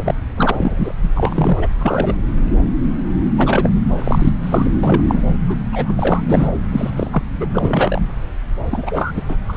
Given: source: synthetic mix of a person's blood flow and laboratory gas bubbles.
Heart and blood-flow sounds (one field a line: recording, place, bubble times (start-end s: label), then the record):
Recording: Doppler ultrasound of blood flow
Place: subclavian vein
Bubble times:
0.00-0.15 s: bubbles
0.36-0.94 s: bubbles
1.02-1.08 s: bubbles
1.15-1.68 s: bubbles
1.79-2.17 s: bubbles
3.36-3.72 s: bubbles
3.99-4.32 s: bubbles
4.43-4.69 s: bubbles
4.83-5.01 s: bubbles
5.08-5.22 s: bubbles
5.46-5.57 s: bubbles
5.72-5.94 s: bubbles
5.97-6.21 s: bubbles
6.28-6.47 s: bubbles
6.71-6.91 s: bubbles
6.96-7.08 s: bubbles
7.11-7.22 s: bubbles
7.40-7.47 s: bubbles
7.54-8.02 s: bubbles
8.71-9.12 s: bubbles
9.15-9.23 s: bubbles
9.29-9.36 s: bubbles
9.48-9.57 s: bubbles
From the record:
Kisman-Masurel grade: 233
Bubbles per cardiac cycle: several, 3 to 8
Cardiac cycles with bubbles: 50 to 99%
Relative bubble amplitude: loud (0.450 to 0.775)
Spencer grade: 3 (all of the cardiac periods contain showers or single bubble signals, but not dominating or overriding the cardiac motion signals)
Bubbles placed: anywhere in the cardiac cycle